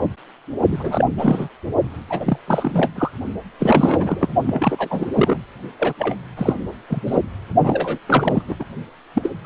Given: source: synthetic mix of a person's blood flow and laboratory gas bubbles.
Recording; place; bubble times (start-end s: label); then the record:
Doppler ultrasound of blood flow; precordium
0.00-0.07 s: bubbles
0.70-1.05 s: bubbles
1.18-1.48 s: bubbles
2.09-2.38 s: bubbles
2.48-2.91 s: bubbles
2.94-3.11 s: bubbles
3.59-4.29 s: bubbles
4.47-5.38 s: bubbles
5.80-5.94 s: bubbles
5.98-6.15 s: bubbles
6.37-6.54 s: bubbles
6.89-7.03 s: bubbles
7.07-7.21 s: bubbles
7.63-7.98 s: bubbles
8.06-8.42 s: bubbles
8.47-8.55 s: bubbles
8.59-8.64 s: bubbles
9.14-9.30 s: bubbles
9.44-9.46 s: bubbles
From the record:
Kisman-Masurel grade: 343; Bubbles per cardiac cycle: rolling drumbeat, 9 or more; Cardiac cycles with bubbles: 100%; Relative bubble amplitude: loud (0.450 to 0.775); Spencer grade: 3 (all of the cardiac periods contain showers or single bubble signals, but not dominating or overriding the cardiac motion signals); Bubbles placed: only in the low amplitude regions of the cardiac cycle